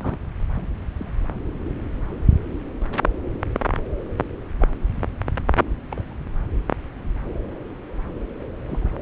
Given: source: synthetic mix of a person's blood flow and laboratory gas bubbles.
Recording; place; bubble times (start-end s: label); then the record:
Doppler ultrasound of blood flow; subclavian vein
0.02-0.17 s: bubbles
0.55-0.67 s: bubbles
0.95-1.28 s: bubbles
4.60-4.67 s: bubbles
5.91-6.04 s: bubbles
6.07-6.17 s: bubbles
8.67-8.92 s: bubbles
From the record:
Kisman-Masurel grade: 121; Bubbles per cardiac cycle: 1 to 2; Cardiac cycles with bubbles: 10 to 50%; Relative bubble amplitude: barely perceptible (0.100 to 0.250); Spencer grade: 2 (many but less than half of the cardiac periods contain bubble signals, singularly or in groups); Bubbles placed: anywhere in the cardiac cycle